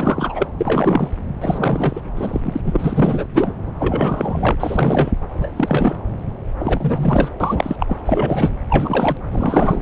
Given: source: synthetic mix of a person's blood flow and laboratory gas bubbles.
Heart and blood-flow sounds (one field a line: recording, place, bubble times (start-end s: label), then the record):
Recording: Doppler ultrasound of blood flow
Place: subclavian vein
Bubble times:
0.00-0.47 s: bubbles
0.58-1.09 s: bubbles
1.41-2.02 s: bubbles
2.16-2.41 s: bubbles
2.43-2.60 s: bubbles
2.64-3.25 s: bubbles
3.34-3.54 s: bubbles
3.79-4.55 s: bubbles
4.59-5.12 s: bubbles
5.33-5.95 s: bubbles
6.59-7.28 s: bubbles
7.40-7.76 s: bubbles
7.79-7.96 s: bubbles
8.05-8.56 s: bubbles
8.69-9.17 s: bubbles
9.31-9.82 s: bubbles
From the record:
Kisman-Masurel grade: 343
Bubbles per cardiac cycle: rolling drumbeat, 9 or more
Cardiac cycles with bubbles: 100%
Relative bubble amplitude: loud (0.450 to 0.775)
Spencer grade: 3 (all of the cardiac periods contain showers or single bubble signals, but not dominating or overriding the cardiac motion signals)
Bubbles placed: anywhere in the cardiac cycle